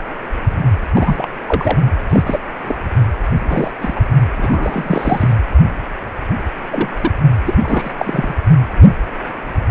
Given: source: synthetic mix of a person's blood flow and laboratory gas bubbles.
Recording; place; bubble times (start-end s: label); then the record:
Doppler ultrasound of blood flow; precordium
0.94-1.31 s: bubbles
1.48-1.77 s: bubbles
2.09-2.22 s: bubbles
2.26-2.40 s: bubbles
2.65-2.77 s: bubbles
3.49-3.71 s: bubbles
3.80-4.00 s: bubbles
4.37-5.33 s: bubbles
6.68-7.12 s: bubbles
7.46-7.56 s: bubbles
7.63-7.91 s: bubbles
7.98-8.35 s: bubbles
From the record:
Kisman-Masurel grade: 233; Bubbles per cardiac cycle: several, 3 to 8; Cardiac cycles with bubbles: 50 to 99%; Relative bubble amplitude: loud (0.450 to 0.775); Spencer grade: 3 (all of the cardiac periods contain showers or single bubble signals, but not dominating or overriding the cardiac motion signals); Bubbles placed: anywhere in the cardiac cycle